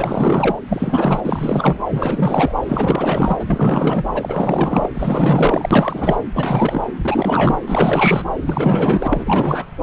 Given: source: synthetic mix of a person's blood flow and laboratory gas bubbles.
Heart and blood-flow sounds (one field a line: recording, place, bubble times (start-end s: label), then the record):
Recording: Doppler ultrasound of blood flow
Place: subclavian vein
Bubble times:
0.00-0.59 s: bubbles
0.69-1.20 s: bubbles
1.23-1.81 s: bubbles
1.90-2.53 s: bubbles
2.68-4.05 s: bubbles
4.13-4.89 s: bubbles
4.94-6.17 s: bubbles
6.33-6.87 s: bubbles
7.01-7.62 s: bubbles
7.67-8.26 s: bubbles
8.44-9.08 s: bubbles
9.10-9.65 s: bubbles
From the record:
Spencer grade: 4 (maximum detectable bubble signal sounding continuously throughout systole and diastole of every cardiac period, and overriding the amplitude of the normal cardiac signals)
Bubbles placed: anywhere in the cardiac cycle